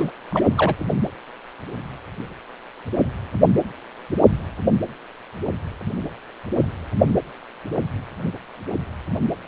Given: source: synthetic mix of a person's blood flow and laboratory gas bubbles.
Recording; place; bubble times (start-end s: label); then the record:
Doppler ultrasound of blood flow; precordium
0.00-0.11 s: bubbles
0.30-0.42 s: bubbles
0.56-0.74 s: bubbles
From the record:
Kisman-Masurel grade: 212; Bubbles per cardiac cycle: several, 3 to 8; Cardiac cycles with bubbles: 1 to 10%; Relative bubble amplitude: moderate (0.250 to 0.450); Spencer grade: 1 (occasional bubble signal discernible with the cardiac motion signal, with majority of cardiac periods free of bubbles); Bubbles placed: anywhere in the cardiac cycle